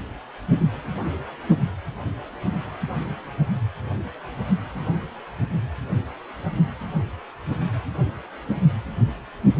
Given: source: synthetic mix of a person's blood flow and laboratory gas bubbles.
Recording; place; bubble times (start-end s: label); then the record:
Doppler ultrasound of blood flow; precordium
no bubbles
From the record:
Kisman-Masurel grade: 000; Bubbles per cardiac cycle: 0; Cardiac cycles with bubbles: 0%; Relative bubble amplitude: no bubbles discernible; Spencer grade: 0 (complete lack of bubble signals)